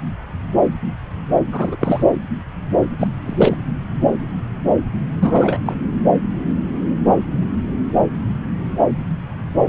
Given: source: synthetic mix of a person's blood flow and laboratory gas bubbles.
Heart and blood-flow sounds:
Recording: Doppler ultrasound of blood flow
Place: subclavian vein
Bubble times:
1.51-1.76 s: bubbles
1.80-2.04 s: bubbles
2.98-3.07 s: bubbles
3.25-3.57 s: bubbles
5.19-5.58 s: bubbles
5.65-5.77 s: bubbles
From the record:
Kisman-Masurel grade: 223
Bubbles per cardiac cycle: several, 3 to 8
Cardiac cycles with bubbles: 10 to 50%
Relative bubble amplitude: loud (0.450 to 0.775)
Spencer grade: 2 (many but less than half of the cardiac periods contain bubble signals, singularly or in groups)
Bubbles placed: anywhere in the cardiac cycle

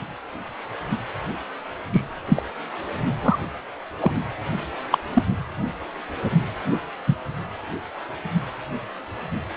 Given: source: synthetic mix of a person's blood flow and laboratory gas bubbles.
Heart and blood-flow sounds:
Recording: Doppler ultrasound of blood flow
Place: precordium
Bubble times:
1.93-2.02 s: bubbles
2.28-2.43 s: bubbles
3.22-3.38 s: bubbles
4.00-4.12 s: bubbles
4.92-4.98 s: bubbles
5.13-5.23 s: bubbles
7.07-7.16 s: bubbles
From the record:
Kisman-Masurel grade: 123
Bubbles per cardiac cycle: 1 to 2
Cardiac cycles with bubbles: 10 to 50%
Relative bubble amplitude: loud (0.450 to 0.775)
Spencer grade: 2 (many but less than half of the cardiac periods contain bubble signals, singularly or in groups)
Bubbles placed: anywhere in the cardiac cycle

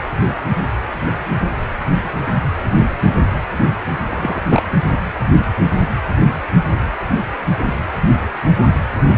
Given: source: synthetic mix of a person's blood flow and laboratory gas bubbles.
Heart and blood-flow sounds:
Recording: Doppler ultrasound of blood flow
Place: precordium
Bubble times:
4.08-4.62 s: bubbles
From the record:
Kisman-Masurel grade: 112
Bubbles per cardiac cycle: 1 to 2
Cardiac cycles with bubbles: 1 to 10%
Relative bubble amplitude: moderate (0.250 to 0.450)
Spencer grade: 1 (occasional bubble signal discernible with the cardiac motion signal, with majority of cardiac periods free of bubbles)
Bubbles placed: anywhere in the cardiac cycle

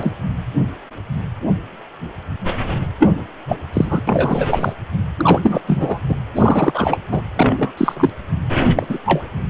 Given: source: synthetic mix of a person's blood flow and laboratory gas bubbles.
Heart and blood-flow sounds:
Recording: Doppler ultrasound of blood flow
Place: precordium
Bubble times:
0.00-0.12 s: bubbles
3.00-3.12 s: bubbles
3.48-3.57 s: bubbles
3.73-4.02 s: bubbles
4.07-4.73 s: bubbles
5.17-5.61 s: bubbles
5.67-6.00 s: bubbles
6.08-6.16 s: bubbles
6.35-7.00 s: bubbles
7.11-7.22 s: bubbles
7.36-7.73 s: bubbles
7.77-8.10 s: bubbles
8.73-8.86 s: bubbles
8.89-8.98 s: bubbles
9.04-9.29 s: bubbles
From the record:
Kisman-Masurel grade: 233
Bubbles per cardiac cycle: several, 3 to 8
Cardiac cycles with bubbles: 50 to 99%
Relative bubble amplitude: loud (0.450 to 0.775)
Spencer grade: 3 (all of the cardiac periods contain showers or single bubble signals, but not dominating or overriding the cardiac motion signals)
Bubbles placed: anywhere in the cardiac cycle

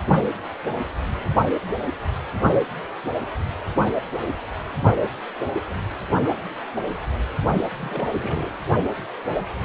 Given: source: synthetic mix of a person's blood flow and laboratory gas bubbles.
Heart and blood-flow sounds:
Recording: Doppler ultrasound of blood flow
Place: precordium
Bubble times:
7.79-8.08 s: bubbles
8.16-8.56 s: bubbles
From the record:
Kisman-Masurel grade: 211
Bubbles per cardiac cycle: several, 3 to 8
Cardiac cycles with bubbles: 1 to 10%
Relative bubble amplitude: barely perceptible (0.100 to 0.250)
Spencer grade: 1 (occasional bubble signal discernible with the cardiac motion signal, with majority of cardiac periods free of bubbles)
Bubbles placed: only in the low amplitude regions of the cardiac cycle

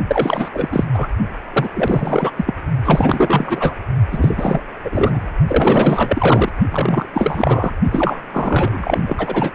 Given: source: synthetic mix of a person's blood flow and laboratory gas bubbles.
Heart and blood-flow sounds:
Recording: Doppler ultrasound of blood flow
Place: precordium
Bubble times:
0.08-0.49 s: bubbles
0.53-0.84 s: bubbles
0.93-1.07 s: bubbles
1.52-1.70 s: bubbles
1.74-2.31 s: bubbles
2.37-2.55 s: bubbles
2.85-3.74 s: bubbles
4.11-4.61 s: bubbles
4.84-5.27 s: bubbles
5.47-6.50 s: bubbles
6.71-7.05 s: bubbles
7.13-7.74 s: bubbles
7.91-8.22 s: bubbles
8.32-9.04 s: bubbles
9.07-9.50 s: bubbles
From the record:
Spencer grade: 4 (maximum detectable bubble signal sounding continuously throughout systole and diastole of every cardiac period, and overriding the amplitude of the normal cardiac signals)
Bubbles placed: only in the low amplitude regions of the cardiac cycle

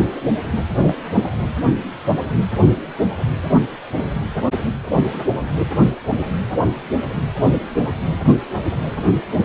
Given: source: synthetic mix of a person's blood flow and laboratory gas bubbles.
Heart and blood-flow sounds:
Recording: Doppler ultrasound of blood flow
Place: precordium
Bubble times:
0.79-0.97 s: bubbles
1.16-1.22 s: bubbles
From the record:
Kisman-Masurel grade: 113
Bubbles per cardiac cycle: 1 to 2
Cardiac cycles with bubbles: 1 to 10%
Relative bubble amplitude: loud (0.450 to 0.775)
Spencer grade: 1 (occasional bubble signal discernible with the cardiac motion signal, with majority of cardiac periods free of bubbles)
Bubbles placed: anywhere in the cardiac cycle

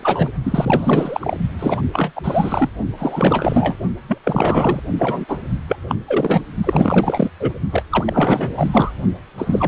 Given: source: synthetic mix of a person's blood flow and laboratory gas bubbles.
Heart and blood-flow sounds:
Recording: Doppler ultrasound of blood flow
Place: precordium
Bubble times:
0.00-0.32 s: bubbles
0.43-1.37 s: bubbles
1.59-1.82 s: bubbles
1.93-2.12 s: bubbles
2.16-2.69 s: bubbles
2.98-3.76 s: bubbles
4.08-4.19 s: bubbles
4.23-4.82 s: bubbles
4.99-5.25 s: bubbles
5.28-5.38 s: bubbles
5.68-5.76 s: bubbles
5.88-5.95 s: bubbles
6.07-6.42 s: bubbles
6.63-7.30 s: bubbles
7.40-7.53 s: bubbles
7.71-7.84 s: bubbles
7.90-8.54 s: bubbles
8.57-8.92 s: bubbles
9.37-9.68 s: bubbles
From the record:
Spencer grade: 4 (maximum detectable bubble signal sounding continuously throughout systole and diastole of every cardiac period, and overriding the amplitude of the normal cardiac signals)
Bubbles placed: only in the low amplitude regions of the cardiac cycle

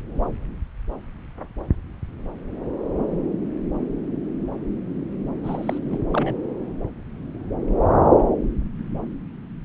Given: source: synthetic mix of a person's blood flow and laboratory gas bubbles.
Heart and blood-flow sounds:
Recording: Doppler ultrasound of blood flow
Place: subclavian vein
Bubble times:
5.44-5.79 s: bubbles
5.86-6.00 s: bubbles
6.11-6.35 s: bubbles
From the record:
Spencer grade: 1 (occasional bubble signal discernible with the cardiac motion signal, with majority of cardiac periods free of bubbles)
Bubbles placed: anywhere in the cardiac cycle

